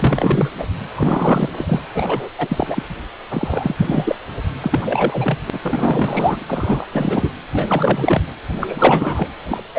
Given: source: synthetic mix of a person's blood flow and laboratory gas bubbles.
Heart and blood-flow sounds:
Doppler ultrasound of blood flow; precordium
0.00-0.51 s: bubbles
0.57-0.64 s: bubbles
0.97-1.50 s: bubbles
1.52-1.81 s: bubbles
1.94-2.29 s: bubbles
2.38-2.83 s: bubbles
3.30-4.16 s: bubbles
4.60-5.38 s: bubbles
5.46-6.45 s: bubbles
6.47-6.87 s: bubbles
6.92-7.29 s: bubbles
7.52-8.22 s: bubbles
8.55-9.28 s: bubbles
9.46-9.64 s: bubbles
9.75-9.79 s: bubbles
From the record:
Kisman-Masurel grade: 343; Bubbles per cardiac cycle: rolling drumbeat, 9 or more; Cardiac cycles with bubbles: 100%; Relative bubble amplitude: loud (0.450 to 0.775); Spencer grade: 3 (all of the cardiac periods contain showers or single bubble signals, but not dominating or overriding the cardiac motion signals); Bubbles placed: anywhere in the cardiac cycle

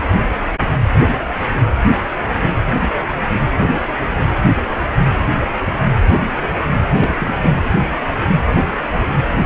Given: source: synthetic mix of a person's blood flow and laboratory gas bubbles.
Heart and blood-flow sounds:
Doppler ultrasound of blood flow; precordium
6.96-7.51 s: bubbles
From the record:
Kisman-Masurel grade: 113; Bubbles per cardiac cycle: 1 to 2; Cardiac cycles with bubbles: 1 to 10%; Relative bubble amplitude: loud (0.450 to 0.775); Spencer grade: 1 (occasional bubble signal discernible with the cardiac motion signal, with majority of cardiac periods free of bubbles); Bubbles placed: anywhere in the cardiac cycle

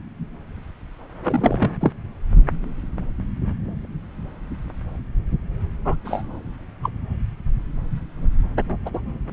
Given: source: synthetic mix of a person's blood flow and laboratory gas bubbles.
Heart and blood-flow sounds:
Doppler ultrasound of blood flow; subclavian vein
1.23-1.75 s: bubbles
1.81-1.92 s: bubbles
5.85-5.96 s: bubbles
6.04-6.22 s: bubbles
6.83-6.90 s: bubbles
8.85-8.90 s: bubbles
8.94-9.01 s: bubbles
From the record:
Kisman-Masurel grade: 122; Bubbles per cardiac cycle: 1 to 2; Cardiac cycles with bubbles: 10 to 50%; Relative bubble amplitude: moderate (0.250 to 0.450); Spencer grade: 2 (many but less than half of the cardiac periods contain bubble signals, singularly or in groups); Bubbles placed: anywhere in the cardiac cycle

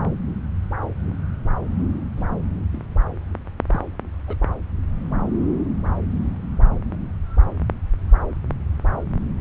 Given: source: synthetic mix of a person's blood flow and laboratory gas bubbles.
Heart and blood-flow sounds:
Doppler ultrasound of blood flow; subclavian vein
2.17-2.23 s: bubbles
2.73-2.85 s: bubbles
3.69-3.81 s: bubbles
4.28-4.36 s: bubbles
6.91-6.97 s: bubbles
From the record:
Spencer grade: 2 (many but less than half of the cardiac periods contain bubble signals, singularly or in groups); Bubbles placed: anywhere in the cardiac cycle

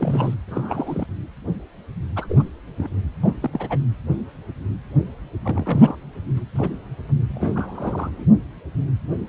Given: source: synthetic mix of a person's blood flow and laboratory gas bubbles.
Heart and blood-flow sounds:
Doppler ultrasound of blood flow; precordium
0.00-0.34 s: bubbles
0.48-1.06 s: bubbles
2.16-2.43 s: bubbles
2.77-2.96 s: bubbles
3.23-3.34 s: bubbles
3.42-3.50 s: bubbles
3.53-3.78 s: bubbles
5.43-5.95 s: bubbles
6.37-6.39 s: bubbles
6.55-6.69 s: bubbles
7.29-8.24 s: bubbles
From the record:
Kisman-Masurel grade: 221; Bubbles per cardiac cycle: several, 3 to 8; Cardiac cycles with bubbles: 10 to 50%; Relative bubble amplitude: barely perceptible (0.100 to 0.250); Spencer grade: 2 (many but less than half of the cardiac periods contain bubble signals, singularly or in groups); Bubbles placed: anywhere in the cardiac cycle

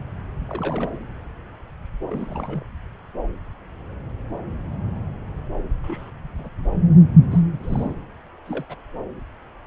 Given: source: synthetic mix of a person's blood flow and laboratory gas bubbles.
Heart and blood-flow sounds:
Doppler ultrasound of blood flow; subclavian vein
0.49-0.90 s: bubbles
0.93-0.98 s: bubbles
2.08-2.63 s: bubbles
5.83-6.11 s: bubbles
6.38-6.49 s: bubbles
7.30-7.40 s: bubbles
7.60-7.95 s: bubbles
8.46-8.65 s: bubbles
8.69-8.76 s: bubbles
From the record:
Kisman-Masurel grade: 221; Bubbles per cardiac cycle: several, 3 to 8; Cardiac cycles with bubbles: 10 to 50%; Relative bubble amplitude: barely perceptible (0.100 to 0.250); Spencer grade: 2 (many but less than half of the cardiac periods contain bubble signals, singularly or in groups); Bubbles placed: anywhere in the cardiac cycle

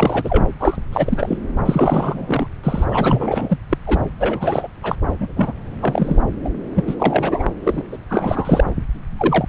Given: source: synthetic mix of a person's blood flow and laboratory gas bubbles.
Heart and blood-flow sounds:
Doppler ultrasound of blood flow; subclavian vein
0.00-0.48 s: bubbles
0.59-0.77 s: bubbles
0.92-1.38 s: bubbles
1.65-2.47 s: bubbles
2.63-2.85 s: bubbles
2.90-3.58 s: bubbles
3.69-3.78 s: bubbles
3.87-3.99 s: bubbles
4.19-4.67 s: bubbles
4.83-4.96 s: bubbles
5.20-5.33 s: bubbles
5.36-5.53 s: bubbles
5.81-6.17 s: bubbles
6.44-6.50 s: bubbles
6.75-6.83 s: bubbles
6.87-6.95 s: bubbles
6.99-7.45 s: bubbles
7.63-7.84 s: bubbles
7.92-7.97 s: bubbles
8.09-8.64 s: bubbles
9.17-9.45 s: bubbles
From the record:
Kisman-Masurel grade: 342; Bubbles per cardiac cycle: rolling drumbeat, 9 or more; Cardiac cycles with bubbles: 100%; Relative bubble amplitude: moderate (0.250 to 0.450); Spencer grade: 3 (all of the cardiac periods contain showers or single bubble signals, but not dominating or overriding the cardiac motion signals); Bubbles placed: anywhere in the cardiac cycle

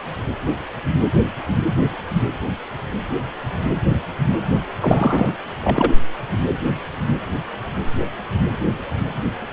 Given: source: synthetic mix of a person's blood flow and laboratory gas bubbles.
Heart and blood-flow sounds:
Doppler ultrasound of blood flow; precordium
4.80-5.37 s: bubbles
5.63-5.92 s: bubbles
From the record:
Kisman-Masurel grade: 213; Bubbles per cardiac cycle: several, 3 to 8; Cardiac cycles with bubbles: 1 to 10%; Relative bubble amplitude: loud (0.450 to 0.775); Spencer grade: 1 (occasional bubble signal discernible with the cardiac motion signal, with majority of cardiac periods free of bubbles); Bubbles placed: anywhere in the cardiac cycle

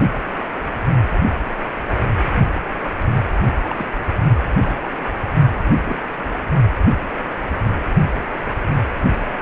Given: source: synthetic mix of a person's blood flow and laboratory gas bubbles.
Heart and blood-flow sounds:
Doppler ultrasound of blood flow; precordium
3.70-3.84 s: bubbles
4.54-4.91 s: bubbles
5.84-5.99 s: bubbles
6.02-6.08 s: bubbles
From the record:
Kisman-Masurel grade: 121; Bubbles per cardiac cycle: 1 to 2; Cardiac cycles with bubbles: 10 to 50%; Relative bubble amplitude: barely perceptible (0.100 to 0.250); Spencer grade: 2 (many but less than half of the cardiac periods contain bubble signals, singularly or in groups); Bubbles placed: only in the low amplitude regions of the cardiac cycle

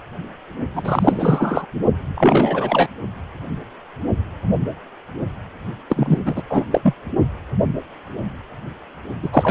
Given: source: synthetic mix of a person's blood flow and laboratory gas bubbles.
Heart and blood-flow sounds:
Doppler ultrasound of blood flow; precordium
0.74-1.66 s: bubbles
2.15-2.88 s: bubbles
5.89-6.20 s: bubbles
6.25-6.42 s: bubbles
6.49-6.64 s: bubbles
6.71-6.94 s: bubbles
9.23-9.29 s: bubbles
9.32-9.51 s: bubbles
From the record:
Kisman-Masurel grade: 333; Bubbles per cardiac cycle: rolling drumbeat, 9 or more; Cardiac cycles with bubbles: 50 to 99%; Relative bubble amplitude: loud (0.450 to 0.775); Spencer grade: 3 (all of the cardiac periods contain showers or single bubble signals, but not dominating or overriding the cardiac motion signals); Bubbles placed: only in the low amplitude regions of the cardiac cycle

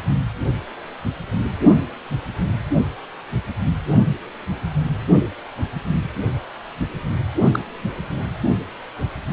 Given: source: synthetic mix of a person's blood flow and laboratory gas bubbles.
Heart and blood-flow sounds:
Doppler ultrasound of blood flow; precordium
7.52-7.59 s: bubbles
From the record:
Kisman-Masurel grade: 112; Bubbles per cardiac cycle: 1 to 2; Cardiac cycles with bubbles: 1 to 10%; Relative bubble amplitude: moderate (0.250 to 0.450); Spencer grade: 1 (occasional bubble signal discernible with the cardiac motion signal, with majority of cardiac periods free of bubbles); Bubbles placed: anywhere in the cardiac cycle

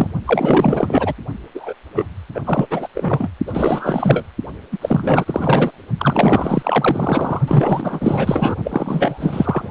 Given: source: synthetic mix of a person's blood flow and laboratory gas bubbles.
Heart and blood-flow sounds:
Doppler ultrasound of blood flow; precordium
0.00-0.08 s: bubbles
0.26-1.13 s: bubbles
1.54-1.73 s: bubbles
1.96-2.06 s: bubbles
2.35-2.41 s: bubbles
2.45-2.67 s: bubbles
2.70-2.88 s: bubbles
2.94-3.29 s: bubbles
3.47-4.25 s: bubbles
4.72-4.78 s: bubbles
4.81-5.71 s: bubbles
5.98-7.41 s: bubbles
7.48-8.55 s: bubbles
8.64-9.70 s: bubbles
From the record:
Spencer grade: 4 (maximum detectable bubble signal sounding continuously throughout systole and diastole of every cardiac period, and overriding the amplitude of the normal cardiac signals); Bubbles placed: only in the low amplitude regions of the cardiac cycle

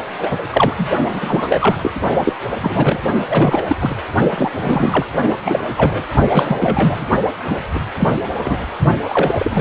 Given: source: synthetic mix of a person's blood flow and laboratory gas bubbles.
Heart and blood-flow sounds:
Doppler ultrasound of blood flow; precordium
0.19-0.42 s: bubbles
0.51-0.73 s: bubbles
0.77-0.87 s: bubbles
1.12-1.76 s: bubbles
1.81-1.91 s: bubbles
2.23-2.33 s: bubbles
2.62-2.99 s: bubbles
3.29-3.76 s: bubbles
3.81-3.94 s: bubbles
4.37-4.51 s: bubbles
4.62-5.06 s: bubbles
5.45-5.64 s: bubbles
5.77-6.04 s: bubbles
6.29-7.07 s: bubbles
7.46-7.56 s: bubbles
7.75-7.79 s: bubbles
7.99-8.09 s: bubbles
8.43-8.69 s: bubbles
9.05-9.35 s: bubbles
9.39-9.61 s: bubbles
From the record:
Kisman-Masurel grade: 243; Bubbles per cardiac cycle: several, 3 to 8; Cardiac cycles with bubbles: 100%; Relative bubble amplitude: loud (0.450 to 0.775); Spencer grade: 3 (all of the cardiac periods contain showers or single bubble signals, but not dominating or overriding the cardiac motion signals); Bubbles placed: only in the low amplitude regions of the cardiac cycle

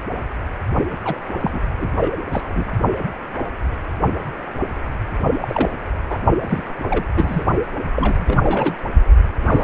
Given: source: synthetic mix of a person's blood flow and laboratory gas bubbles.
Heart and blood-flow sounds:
Doppler ultrasound of blood flow; precordium
1.00-1.18 s: bubbles
1.40-1.60 s: bubbles
1.77-1.90 s: bubbles
1.96-2.12 s: bubbles
2.32-2.71 s: bubbles
5.42-5.71 s: bubbles
6.09-6.19 s: bubbles
6.43-6.63 s: bubbles
6.89-7.07 s: bubbles
7.16-7.45 s: bubbles
7.92-8.38 s: bubbles
8.43-8.76 s: bubbles
9.45-9.64 s: bubbles
From the record:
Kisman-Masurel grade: 232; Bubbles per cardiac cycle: several, 3 to 8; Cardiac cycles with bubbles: 50 to 99%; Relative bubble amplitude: moderate (0.250 to 0.450); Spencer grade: 3 (all of the cardiac periods contain showers or single bubble signals, but not dominating or overriding the cardiac motion signals); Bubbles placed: only in the low amplitude regions of the cardiac cycle

